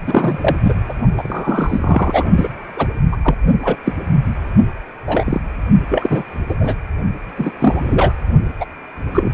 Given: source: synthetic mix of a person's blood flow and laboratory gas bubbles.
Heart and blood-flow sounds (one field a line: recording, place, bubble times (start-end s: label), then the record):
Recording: Doppler ultrasound of blood flow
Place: precordium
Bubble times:
0.06-0.56 s: bubbles
0.63-0.73 s: bubbles
0.89-0.94 s: bubbles
1.17-2.29 s: bubbles
2.36-2.50 s: bubbles
2.76-2.87 s: bubbles
3.12-3.17 s: bubbles
3.24-3.37 s: bubbles
3.62-3.75 s: bubbles
3.85-3.92 s: bubbles
5.07-5.41 s: bubbles
5.89-6.23 s: bubbles
6.48-6.55 s: bubbles
6.60-6.75 s: bubbles
7.37-7.51 s: bubbles
7.59-8.13 s: bubbles
8.59-8.65 s: bubbles
9.13-9.32 s: bubbles
From the record:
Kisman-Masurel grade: 243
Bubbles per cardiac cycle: several, 3 to 8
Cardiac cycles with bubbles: 100%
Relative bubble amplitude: loud (0.450 to 0.775)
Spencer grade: 3 (all of the cardiac periods contain showers or single bubble signals, but not dominating or overriding the cardiac motion signals)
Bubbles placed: only in the low amplitude regions of the cardiac cycle